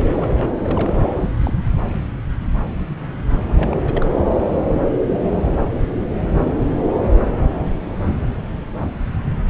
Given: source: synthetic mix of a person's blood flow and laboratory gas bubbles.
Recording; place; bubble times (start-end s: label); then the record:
Doppler ultrasound of blood flow; subclavian vein
0.15-0.59 s: bubbles
0.62-0.94 s: bubbles
1.02-1.10 s: bubbles
1.18-1.31 s: bubbles
1.43-1.54 s: bubbles
3.55-3.77 s: bubbles
3.84-4.15 s: bubbles
From the record:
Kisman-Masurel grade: 221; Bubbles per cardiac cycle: several, 3 to 8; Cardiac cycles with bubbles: 10 to 50%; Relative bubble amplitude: barely perceptible (0.100 to 0.250); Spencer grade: 2 (many but less than half of the cardiac periods contain bubble signals, singularly or in groups); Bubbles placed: anywhere in the cardiac cycle